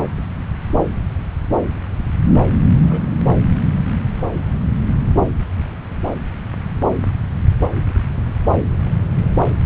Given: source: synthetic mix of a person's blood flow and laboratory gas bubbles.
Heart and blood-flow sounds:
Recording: Doppler ultrasound of blood flow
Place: subclavian vein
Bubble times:
2.90-3.01 s: bubbles
3.26-3.34 s: bubbles
From the record:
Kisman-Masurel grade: 121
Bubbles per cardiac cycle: 1 to 2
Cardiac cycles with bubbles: 10 to 50%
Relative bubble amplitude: barely perceptible (0.100 to 0.250)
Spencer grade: 2 (many but less than half of the cardiac periods contain bubble signals, singularly or in groups)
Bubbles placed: anywhere in the cardiac cycle

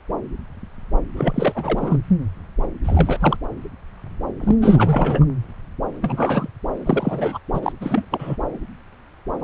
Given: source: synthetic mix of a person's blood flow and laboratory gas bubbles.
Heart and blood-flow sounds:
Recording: Doppler ultrasound of blood flow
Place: subclavian vein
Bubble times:
1.16-1.97 s: bubbles
2.84-3.38 s: bubbles
4.40-4.56 s: bubbles
4.61-5.25 s: bubbles
6.01-6.49 s: bubbles
6.86-7.38 s: bubbles
7.54-7.72 s: bubbles
7.81-8.05 s: bubbles
8.10-8.36 s: bubbles
9.41-9.44 s: bubbles
From the record:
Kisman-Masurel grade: 332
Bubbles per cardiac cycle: rolling drumbeat, 9 or more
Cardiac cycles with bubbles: 50 to 99%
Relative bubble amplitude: moderate (0.250 to 0.450)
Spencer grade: 3 (all of the cardiac periods contain showers or single bubble signals, but not dominating or overriding the cardiac motion signals)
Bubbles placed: anywhere in the cardiac cycle

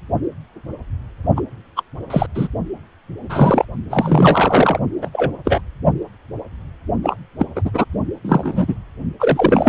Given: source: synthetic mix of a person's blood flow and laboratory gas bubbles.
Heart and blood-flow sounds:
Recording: Doppler ultrasound of blood flow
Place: precordium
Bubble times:
1.36-1.41 s: bubbles
1.75-1.82 s: bubbles
2.10-2.26 s: bubbles
2.35-2.48 s: bubbles
3.29-3.65 s: bubbles
3.90-4.80 s: bubbles
5.01-5.10 s: bubbles
5.13-5.33 s: bubbles
5.45-5.61 s: bubbles
7.03-7.16 s: bubbles
7.39-7.46 s: bubbles
7.55-7.62 s: bubbles
7.65-7.70 s: bubbles
7.74-7.85 s: bubbles
8.24-8.75 s: bubbles
9.20-9.69 s: bubbles
From the record:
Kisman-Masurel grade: 233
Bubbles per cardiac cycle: several, 3 to 8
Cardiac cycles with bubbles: 50 to 99%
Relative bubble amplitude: loud (0.450 to 0.775)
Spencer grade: 3 (all of the cardiac periods contain showers or single bubble signals, but not dominating or overriding the cardiac motion signals)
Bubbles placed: only in the low amplitude regions of the cardiac cycle

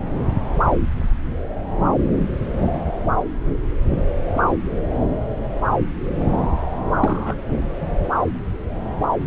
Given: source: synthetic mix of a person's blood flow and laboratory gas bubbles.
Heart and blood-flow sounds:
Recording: Doppler ultrasound of blood flow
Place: subclavian vein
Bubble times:
7.00-7.34 s: bubbles
From the record:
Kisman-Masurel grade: 112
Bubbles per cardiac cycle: 1 to 2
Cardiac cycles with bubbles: 1 to 10%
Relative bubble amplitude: moderate (0.250 to 0.450)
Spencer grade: 1 (occasional bubble signal discernible with the cardiac motion signal, with majority of cardiac periods free of bubbles)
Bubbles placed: anywhere in the cardiac cycle

